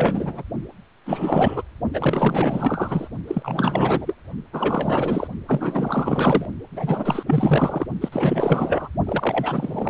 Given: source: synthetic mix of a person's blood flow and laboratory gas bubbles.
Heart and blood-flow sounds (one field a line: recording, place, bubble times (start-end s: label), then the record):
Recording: Doppler ultrasound of blood flow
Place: precordium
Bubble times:
0.00-0.44 s: bubbles
1.05-1.62 s: bubbles
1.93-3.08 s: bubbles
3.27-4.15 s: bubbles
4.53-5.28 s: bubbles
5.48-6.46 s: bubbles
6.72-7.23 s: bubbles
7.27-7.87 s: bubbles
8.01-8.09 s: bubbles
8.12-8.88 s: bubbles
9.05-9.89 s: bubbles
From the record:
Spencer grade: 4 (maximum detectable bubble signal sounding continuously throughout systole and diastole of every cardiac period, and overriding the amplitude of the normal cardiac signals)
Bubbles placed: only in the low amplitude regions of the cardiac cycle